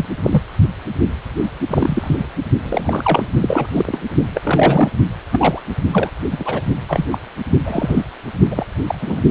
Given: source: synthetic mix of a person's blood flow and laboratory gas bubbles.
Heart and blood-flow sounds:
Doppler ultrasound of blood flow; precordium
0.00-0.05 s: bubbles
0.24-0.42 s: bubbles
1.70-2.27 s: bubbles
2.63-3.29 s: bubbles
3.40-3.67 s: bubbles
3.70-3.98 s: bubbles
4.35-4.91 s: bubbles
5.32-5.62 s: bubbles
5.92-6.10 s: bubbles
6.31-6.62 s: bubbles
6.89-7.06 s: bubbles
7.11-7.19 s: bubbles
7.65-8.04 s: bubbles
8.51-8.64 s: bubbles
8.87-8.98 s: bubbles
9.01-9.21 s: bubbles
From the record:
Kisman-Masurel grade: 232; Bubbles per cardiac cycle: several, 3 to 8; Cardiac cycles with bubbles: 50 to 99%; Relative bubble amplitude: moderate (0.250 to 0.450); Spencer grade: 3 (all of the cardiac periods contain showers or single bubble signals, but not dominating or overriding the cardiac motion signals); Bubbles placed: only in the low amplitude regions of the cardiac cycle

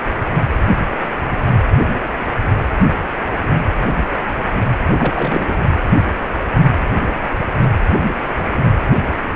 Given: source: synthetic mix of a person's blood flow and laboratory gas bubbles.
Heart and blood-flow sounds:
Doppler ultrasound of blood flow; precordium
4.90-5.68 s: bubbles
From the record:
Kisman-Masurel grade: 212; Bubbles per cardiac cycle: several, 3 to 8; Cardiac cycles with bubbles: 1 to 10%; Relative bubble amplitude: moderate (0.250 to 0.450); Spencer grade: 1 (occasional bubble signal discernible with the cardiac motion signal, with majority of cardiac periods free of bubbles); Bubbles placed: anywhere in the cardiac cycle

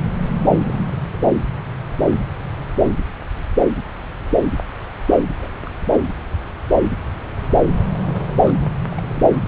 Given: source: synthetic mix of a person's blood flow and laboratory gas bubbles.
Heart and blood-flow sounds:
Doppler ultrasound of blood flow; subclavian vein
0.53-0.57 s: bubbles
0.67-0.89 s: bubbles
1.12-1.24 s: bubbles
5.41-5.48 s: bubbles
5.66-5.70 s: bubbles
5.89-6.01 s: bubbles
6.04-6.07 s: bubbles
7.93-7.97 s: bubbles
8.02-8.52 s: bubbles
8.60-8.68 s: bubbles
8.91-9.21 s: bubbles
9.34-9.41 s: bubbles
From the record:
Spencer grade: 2 (many but less than half of the cardiac periods contain bubble signals, singularly or in groups); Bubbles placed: anywhere in the cardiac cycle

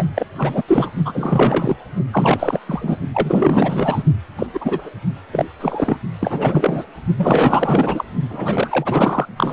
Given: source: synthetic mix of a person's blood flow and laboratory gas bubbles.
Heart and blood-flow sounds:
Doppler ultrasound of blood flow; precordium
0.00-0.05 s: bubbles
0.15-0.26 s: bubbles
0.38-0.62 s: bubbles
0.67-0.90 s: bubbles
1.04-1.76 s: bubbles
2.11-2.60 s: bubbles
2.67-2.97 s: bubbles
3.14-4.03 s: bubbles
4.38-4.46 s: bubbles
4.53-4.90 s: bubbles
5.32-5.46 s: bubbles
5.60-5.97 s: bubbles
6.19-6.86 s: bubbles
7.18-8.04 s: bubbles
8.29-9.26 s: bubbles
9.37-9.53 s: bubbles
From the record:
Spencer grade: 4 (maximum detectable bubble signal sounding continuously throughout systole and diastole of every cardiac period, and overriding the amplitude of the normal cardiac signals); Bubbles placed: only in the low amplitude regions of the cardiac cycle

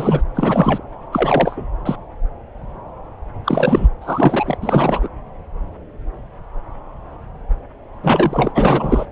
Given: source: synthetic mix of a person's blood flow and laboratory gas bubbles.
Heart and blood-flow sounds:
Doppler ultrasound of blood flow; subclavian vein
0.00-0.23 s: bubbles
0.35-0.82 s: bubbles
1.11-1.65 s: bubbles
1.85-1.95 s: bubbles
3.44-3.88 s: bubbles
4.01-4.58 s: bubbles
4.62-5.08 s: bubbles
8.03-8.52 s: bubbles
8.54-9.05 s: bubbles
From the record:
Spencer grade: 3 (all of the cardiac periods contain showers or single bubble signals, but not dominating or overriding the cardiac motion signals); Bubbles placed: anywhere in the cardiac cycle

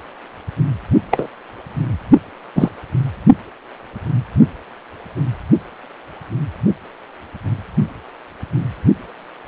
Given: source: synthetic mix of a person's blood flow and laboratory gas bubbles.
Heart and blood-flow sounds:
Doppler ultrasound of blood flow; precordium
1.10-1.28 s: bubbles
2.56-2.70 s: bubbles
From the record:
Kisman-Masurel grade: 123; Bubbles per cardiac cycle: 1 to 2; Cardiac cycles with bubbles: 10 to 50%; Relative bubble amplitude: loud (0.450 to 0.775); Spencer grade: 2 (many but less than half of the cardiac periods contain bubble signals, singularly or in groups); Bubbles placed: only in the low amplitude regions of the cardiac cycle

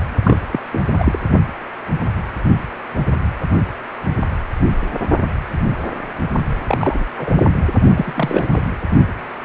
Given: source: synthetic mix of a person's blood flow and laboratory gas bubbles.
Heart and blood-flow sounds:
Doppler ultrasound of blood flow; precordium
0.23-0.38 s: bubbles
0.52-0.59 s: bubbles
0.73-0.80 s: bubbles
0.99-1.19 s: bubbles
6.68-7.04 s: bubbles
7.16-7.43 s: bubbles
7.96-8.48 s: bubbles
8.54-8.62 s: bubbles
From the record:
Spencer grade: 2 (many but less than half of the cardiac periods contain bubble signals, singularly or in groups); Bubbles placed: only in the low amplitude regions of the cardiac cycle

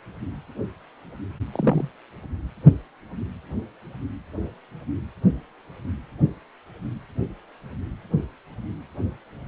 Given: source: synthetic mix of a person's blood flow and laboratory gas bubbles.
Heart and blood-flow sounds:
Doppler ultrasound of blood flow; precordium
1.52-1.89 s: bubbles
From the record:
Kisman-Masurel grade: 112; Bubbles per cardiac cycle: 1 to 2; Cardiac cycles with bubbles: 1 to 10%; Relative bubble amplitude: moderate (0.250 to 0.450); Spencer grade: 1 (occasional bubble signal discernible with the cardiac motion signal, with majority of cardiac periods free of bubbles); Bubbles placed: anywhere in the cardiac cycle

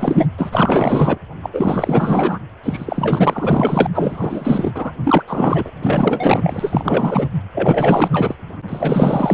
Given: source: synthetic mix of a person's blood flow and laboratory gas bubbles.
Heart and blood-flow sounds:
Doppler ultrasound of blood flow; precordium
0.00-0.26 s: bubbles
0.38-1.18 s: bubbles
1.42-1.50 s: bubbles
1.53-2.39 s: bubbles
2.63-3.86 s: bubbles
3.94-4.94 s: bubbles
5.04-5.23 s: bubbles
5.27-5.70 s: bubbles
5.82-7.27 s: bubbles
7.54-8.34 s: bubbles
8.67-9.34 s: bubbles
From the record:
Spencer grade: 4 (maximum detectable bubble signal sounding continuously throughout systole and diastole of every cardiac period, and overriding the amplitude of the normal cardiac signals); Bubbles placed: anywhere in the cardiac cycle

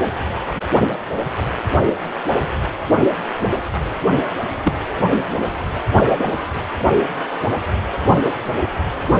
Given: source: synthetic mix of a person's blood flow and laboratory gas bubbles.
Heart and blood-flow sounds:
Doppler ultrasound of blood flow; precordium
4.63-4.75 s: bubbles
5.10-5.38 s: bubbles
From the record:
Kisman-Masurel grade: 112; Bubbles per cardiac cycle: 1 to 2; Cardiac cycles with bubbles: 1 to 10%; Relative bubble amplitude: moderate (0.250 to 0.450); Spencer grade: 1 (occasional bubble signal discernible with the cardiac motion signal, with majority of cardiac periods free of bubbles); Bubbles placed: only in the low amplitude regions of the cardiac cycle

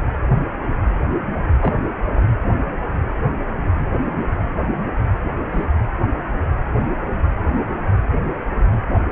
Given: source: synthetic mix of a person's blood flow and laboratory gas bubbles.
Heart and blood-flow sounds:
Doppler ultrasound of blood flow; precordium
1.62-1.73 s: bubbles
2.16-2.23 s: bubbles
5.52-5.66 s: bubbles
From the record:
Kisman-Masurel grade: 122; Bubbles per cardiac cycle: 1 to 2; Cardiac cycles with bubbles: 10 to 50%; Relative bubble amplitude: moderate (0.250 to 0.450); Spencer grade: 2 (many but less than half of the cardiac periods contain bubble signals, singularly or in groups); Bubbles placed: anywhere in the cardiac cycle

